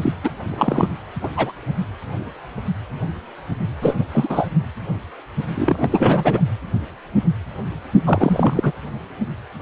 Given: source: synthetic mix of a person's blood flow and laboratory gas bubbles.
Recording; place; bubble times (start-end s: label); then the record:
Doppler ultrasound of blood flow; precordium
0.02-0.12 s: bubbles
0.24-0.30 s: bubbles
0.49-0.89 s: bubbles
1.22-1.29 s: bubbles
1.36-1.52 s: bubbles
3.82-3.94 s: bubbles
3.97-4.05 s: bubbles
4.12-4.48 s: bubbles
5.56-5.88 s: bubbles
5.91-6.41 s: bubbles
8.05-8.72 s: bubbles
From the record:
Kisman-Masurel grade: 333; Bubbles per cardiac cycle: rolling drumbeat, 9 or more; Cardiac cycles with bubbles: 50 to 99%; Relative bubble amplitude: loud (0.450 to 0.775); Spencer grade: 3 (all of the cardiac periods contain showers or single bubble signals, but not dominating or overriding the cardiac motion signals); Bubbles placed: only in the low amplitude regions of the cardiac cycle